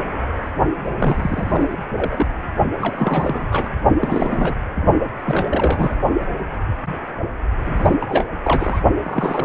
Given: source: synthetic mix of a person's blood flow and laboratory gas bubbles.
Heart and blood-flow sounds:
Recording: Doppler ultrasound of blood flow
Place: precordium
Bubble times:
0.99-1.67 s: bubbles
1.71-1.78 s: bubbles
1.97-2.26 s: bubbles
2.79-3.69 s: bubbles
4.01-4.54 s: bubbles
5.26-5.95 s: bubbles
7.64-8.25 s: bubbles
8.44-8.81 s: bubbles
9.01-9.45 s: bubbles
From the record:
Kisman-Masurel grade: 332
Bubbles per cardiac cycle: rolling drumbeat, 9 or more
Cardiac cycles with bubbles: 50 to 99%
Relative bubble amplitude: moderate (0.250 to 0.450)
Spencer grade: 3 (all of the cardiac periods contain showers or single bubble signals, but not dominating or overriding the cardiac motion signals)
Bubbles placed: only in the low amplitude regions of the cardiac cycle

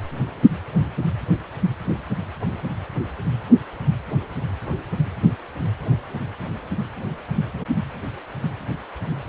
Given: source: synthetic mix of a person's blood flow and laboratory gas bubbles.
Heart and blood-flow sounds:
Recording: Doppler ultrasound of blood flow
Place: precordium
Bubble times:
no bubbles
From the record:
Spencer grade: 0 (complete lack of bubble signals)

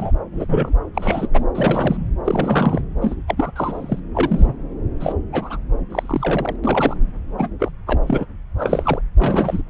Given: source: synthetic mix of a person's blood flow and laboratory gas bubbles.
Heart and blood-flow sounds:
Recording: Doppler ultrasound of blood flow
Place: subclavian vein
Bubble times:
0.00-0.11 s: bubbles
0.32-0.73 s: bubbles
0.94-1.29 s: bubbles
1.33-1.47 s: bubbles
1.54-2.12 s: bubbles
2.24-2.81 s: bubbles
3.01-3.15 s: bubbles
3.27-3.51 s: bubbles
3.56-4.00 s: bubbles
4.14-4.56 s: bubbles
5.00-5.14 s: bubbles
5.32-5.57 s: bubbles
5.90-6.56 s: bubbles
6.63-6.96 s: bubbles
7.38-7.48 s: bubbles
7.59-7.71 s: bubbles
7.87-8.00 s: bubbles
8.03-8.26 s: bubbles
8.59-9.01 s: bubbles
9.19-9.62 s: bubbles
From the record:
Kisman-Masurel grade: 232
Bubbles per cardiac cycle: several, 3 to 8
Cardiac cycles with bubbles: 50 to 99%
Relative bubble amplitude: moderate (0.250 to 0.450)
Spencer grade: 3 (all of the cardiac periods contain showers or single bubble signals, but not dominating or overriding the cardiac motion signals)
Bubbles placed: anywhere in the cardiac cycle

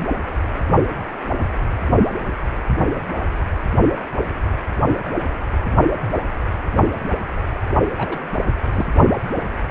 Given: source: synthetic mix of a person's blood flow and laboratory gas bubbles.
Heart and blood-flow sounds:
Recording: Doppler ultrasound of blood flow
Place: precordium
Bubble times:
7.97-8.19 s: bubbles
8.72-8.86 s: bubbles
From the record:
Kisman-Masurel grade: 111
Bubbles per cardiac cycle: 1 to 2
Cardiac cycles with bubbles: 1 to 10%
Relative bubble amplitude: barely perceptible (0.100 to 0.250)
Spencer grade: 1 (occasional bubble signal discernible with the cardiac motion signal, with majority of cardiac periods free of bubbles)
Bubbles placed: only in the low amplitude regions of the cardiac cycle

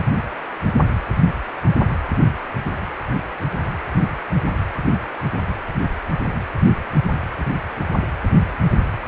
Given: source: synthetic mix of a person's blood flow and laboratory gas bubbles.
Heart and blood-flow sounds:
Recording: Doppler ultrasound of blood flow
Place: precordium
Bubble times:
no bubbles
From the record:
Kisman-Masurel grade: 000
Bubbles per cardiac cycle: 0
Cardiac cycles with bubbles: 0%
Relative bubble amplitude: no bubbles discernible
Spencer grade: 0 (complete lack of bubble signals)

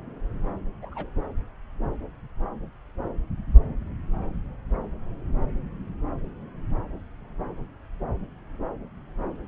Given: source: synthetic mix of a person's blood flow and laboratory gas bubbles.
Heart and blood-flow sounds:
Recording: Doppler ultrasound of blood flow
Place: subclavian vein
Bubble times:
0.82-1.09 s: bubbles
From the record:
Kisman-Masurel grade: 121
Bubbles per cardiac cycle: 1 to 2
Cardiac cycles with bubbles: 10 to 50%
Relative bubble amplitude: barely perceptible (0.100 to 0.250)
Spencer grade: 2 (many but less than half of the cardiac periods contain bubble signals, singularly or in groups)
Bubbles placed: anywhere in the cardiac cycle

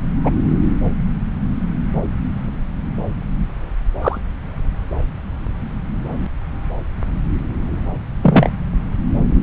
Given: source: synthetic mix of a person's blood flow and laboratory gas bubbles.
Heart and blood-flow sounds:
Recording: Doppler ultrasound of blood flow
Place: subclavian vein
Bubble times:
0.24-0.31 s: bubbles
4.01-4.18 s: bubbles
8.22-8.50 s: bubbles
From the record:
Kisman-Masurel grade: 123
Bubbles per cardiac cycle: 1 to 2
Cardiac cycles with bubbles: 10 to 50%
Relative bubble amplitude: loud (0.450 to 0.775)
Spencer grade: 2 (many but less than half of the cardiac periods contain bubble signals, singularly or in groups)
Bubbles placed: anywhere in the cardiac cycle

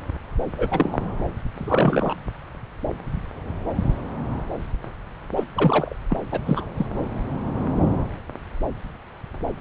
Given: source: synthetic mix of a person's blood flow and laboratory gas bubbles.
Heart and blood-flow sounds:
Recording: Doppler ultrasound of blood flow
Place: subclavian vein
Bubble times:
0.57-0.99 s: bubbles
1.53-2.14 s: bubbles
5.36-5.44 s: bubbles
5.54-5.96 s: bubbles
6.10-6.17 s: bubbles
6.32-6.38 s: bubbles
6.46-6.64 s: bubbles
6.77-6.86 s: bubbles
From the record:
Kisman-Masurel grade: 222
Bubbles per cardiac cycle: several, 3 to 8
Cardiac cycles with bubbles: 10 to 50%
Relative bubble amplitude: moderate (0.250 to 0.450)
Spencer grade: 2 (many but less than half of the cardiac periods contain bubble signals, singularly or in groups)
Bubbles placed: anywhere in the cardiac cycle

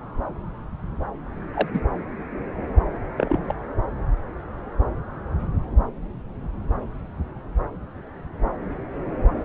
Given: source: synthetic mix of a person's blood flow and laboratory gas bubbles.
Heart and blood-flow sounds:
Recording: Doppler ultrasound of blood flow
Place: subclavian vein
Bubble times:
1.54-1.69 s: bubbles
1.74-1.80 s: bubbles
3.17-3.39 s: bubbles
3.43-3.54 s: bubbles
From the record:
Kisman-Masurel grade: 122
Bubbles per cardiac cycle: 1 to 2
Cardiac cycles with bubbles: 10 to 50%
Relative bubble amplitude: moderate (0.250 to 0.450)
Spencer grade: 2 (many but less than half of the cardiac periods contain bubble signals, singularly or in groups)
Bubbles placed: anywhere in the cardiac cycle

